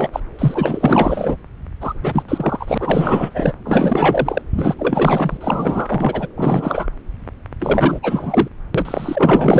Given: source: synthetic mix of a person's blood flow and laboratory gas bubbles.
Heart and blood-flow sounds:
Doppler ultrasound of blood flow; subclavian vein
0.00-0.09 s: bubbles
0.12-0.20 s: bubbles
0.39-1.36 s: bubbles
1.81-2.23 s: bubbles
2.28-3.54 s: bubbles
3.65-4.42 s: bubbles
4.54-4.75 s: bubbles
4.79-5.38 s: bubbles
5.41-6.27 s: bubbles
6.36-6.88 s: bubbles
7.59-8.00 s: bubbles
8.03-8.48 s: bubbles
8.74-9.60 s: bubbles
From the record:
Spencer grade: 4 (maximum detectable bubble signal sounding continuously throughout systole and diastole of every cardiac period, and overriding the amplitude of the normal cardiac signals); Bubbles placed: anywhere in the cardiac cycle

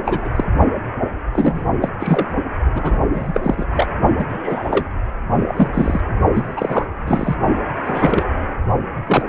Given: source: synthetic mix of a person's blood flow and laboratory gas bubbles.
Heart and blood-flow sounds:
Doppler ultrasound of blood flow; precordium
0.04-0.29 s: bubbles
0.36-0.44 s: bubbles
1.33-1.68 s: bubbles
1.81-1.89 s: bubbles
2.00-2.39 s: bubbles
2.75-3.00 s: bubbles
3.14-3.40 s: bubbles
3.42-3.65 s: bubbles
3.73-3.94 s: bubbles
4.19-4.25 s: bubbles
4.29-4.86 s: bubbles
5.30-5.68 s: bubbles
5.73-6.01 s: bubbles
6.34-6.54 s: bubbles
6.56-6.85 s: bubbles
7.07-7.36 s: bubbles
7.86-8.24 s: bubbles
9.06-9.22 s: bubbles
From the record:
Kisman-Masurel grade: 243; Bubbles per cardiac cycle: several, 3 to 8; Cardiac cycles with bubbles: 100%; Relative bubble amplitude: loud (0.450 to 0.775); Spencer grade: 3 (all of the cardiac periods contain showers or single bubble signals, but not dominating or overriding the cardiac motion signals); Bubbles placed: only in the low amplitude regions of the cardiac cycle

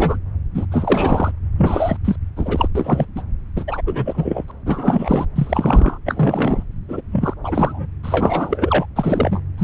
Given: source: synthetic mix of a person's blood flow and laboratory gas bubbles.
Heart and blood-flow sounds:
Doppler ultrasound of blood flow; subclavian vein
0.00-0.17 s: bubbles
0.54-0.66 s: bubbles
0.71-1.31 s: bubbles
1.57-1.97 s: bubbles
2.04-2.16 s: bubbles
2.37-2.68 s: bubbles
2.75-3.05 s: bubbles
3.15-3.22 s: bubbles
3.55-3.82 s: bubbles
3.87-4.44 s: bubbles
4.48-4.52 s: bubbles
4.66-5.25 s: bubbles
5.36-5.98 s: bubbles
6.05-6.63 s: bubbles
6.88-7.01 s: bubbles
7.12-7.34 s: bubbles
7.42-7.87 s: bubbles
8.03-8.86 s: bubbles
8.96-9.41 s: bubbles
9.58-9.64 s: bubbles
From the record:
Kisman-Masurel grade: 343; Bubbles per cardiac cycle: rolling drumbeat, 9 or more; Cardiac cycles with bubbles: 100%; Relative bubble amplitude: loud (0.450 to 0.775); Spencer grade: 3 (all of the cardiac periods contain showers or single bubble signals, but not dominating or overriding the cardiac motion signals); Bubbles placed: anywhere in the cardiac cycle

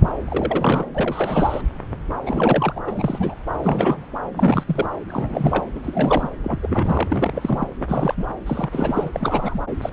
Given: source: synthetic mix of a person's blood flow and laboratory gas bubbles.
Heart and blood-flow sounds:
Doppler ultrasound of blood flow; subclavian vein
0.25-0.85 s: bubbles
0.94-1.61 s: bubbles
2.26-2.80 s: bubbles
2.87-3.35 s: bubbles
3.62-4.06 s: bubbles
4.35-4.63 s: bubbles
4.67-4.86 s: bubbles
5.08-5.66 s: bubbles
5.75-5.80 s: bubbles
5.83-6.29 s: bubbles
6.44-6.60 s: bubbles
6.62-7.08 s: bubbles
7.11-7.67 s: bubbles
7.80-8.14 s: bubbles
8.18-8.26 s: bubbles
8.46-9.10 s: bubbles
9.13-9.60 s: bubbles
9.81-9.93 s: bubbles
From the record:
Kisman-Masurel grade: 332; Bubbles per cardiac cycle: rolling drumbeat, 9 or more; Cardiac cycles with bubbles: 50 to 99%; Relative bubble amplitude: moderate (0.250 to 0.450); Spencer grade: 3 (all of the cardiac periods contain showers or single bubble signals, but not dominating or overriding the cardiac motion signals); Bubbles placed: anywhere in the cardiac cycle

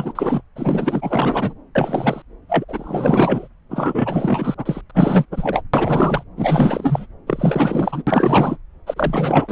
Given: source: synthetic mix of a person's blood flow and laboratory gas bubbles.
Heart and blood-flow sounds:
Doppler ultrasound of blood flow; subclavian vein
0.00-0.12 s: bubbles
0.15-0.42 s: bubbles
0.56-1.54 s: bubbles
1.75-2.22 s: bubbles
2.49-2.65 s: bubbles
2.68-3.48 s: bubbles
3.70-4.54 s: bubbles
4.57-4.81 s: bubbles
4.89-4.92 s: bubbles
4.94-5.25 s: bubbles
5.31-5.61 s: bubbles
5.73-6.23 s: bubbles
6.36-7.06 s: bubbles
7.26-8.04 s: bubbles
8.07-8.57 s: bubbles
8.87-9.52 s: bubbles
From the record:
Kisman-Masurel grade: 444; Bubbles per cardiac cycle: continuous sound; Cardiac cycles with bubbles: 100%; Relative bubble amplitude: maximal (0.775 to 0.999); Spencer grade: 4 (maximum detectable bubble signal sounding continuously throughout systole and diastole of every cardiac period, and overriding the amplitude of the normal cardiac signals); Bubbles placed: anywhere in the cardiac cycle

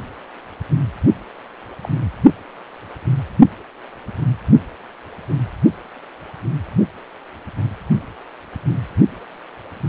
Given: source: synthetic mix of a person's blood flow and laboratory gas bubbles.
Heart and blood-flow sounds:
Doppler ultrasound of blood flow; precordium
1.84-1.87 s: bubbles
From the record:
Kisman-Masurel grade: 111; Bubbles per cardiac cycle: 1 to 2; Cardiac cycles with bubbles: 1 to 10%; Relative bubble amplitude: barely perceptible (0.100 to 0.250); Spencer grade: 1 (occasional bubble signal discernible with the cardiac motion signal, with majority of cardiac periods free of bubbles); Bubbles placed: only in the low amplitude regions of the cardiac cycle

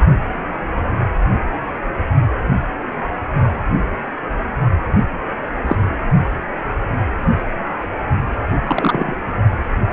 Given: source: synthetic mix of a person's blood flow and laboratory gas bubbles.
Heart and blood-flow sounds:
Doppler ultrasound of blood flow; precordium
5.67-5.76 s: bubbles
8.64-9.15 s: bubbles
From the record:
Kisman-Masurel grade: 123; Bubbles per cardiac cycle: 1 to 2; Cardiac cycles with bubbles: 10 to 50%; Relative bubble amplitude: loud (0.450 to 0.775); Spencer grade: 2 (many but less than half of the cardiac periods contain bubble signals, singularly or in groups); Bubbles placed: only in the low amplitude regions of the cardiac cycle

